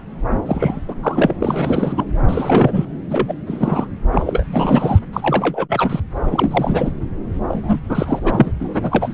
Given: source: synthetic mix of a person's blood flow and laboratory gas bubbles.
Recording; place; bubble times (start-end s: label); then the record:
Doppler ultrasound of blood flow; subclavian vein
0.46-0.80 s: bubbles
0.88-0.95 s: bubbles
1.03-1.34 s: bubbles
1.39-2.04 s: bubbles
2.28-2.85 s: bubbles
3.10-3.34 s: bubbles
3.46-3.88 s: bubbles
4.12-4.46 s: bubbles
4.50-4.99 s: bubbles
5.13-6.00 s: bubbles
6.22-6.91 s: bubbles
7.48-7.81 s: bubbles
7.89-8.52 s: bubbles
8.59-9.14 s: bubbles
From the record:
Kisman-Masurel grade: 343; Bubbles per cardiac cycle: rolling drumbeat, 9 or more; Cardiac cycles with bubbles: 100%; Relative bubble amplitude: loud (0.450 to 0.775); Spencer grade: 3 (all of the cardiac periods contain showers or single bubble signals, but not dominating or overriding the cardiac motion signals); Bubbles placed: anywhere in the cardiac cycle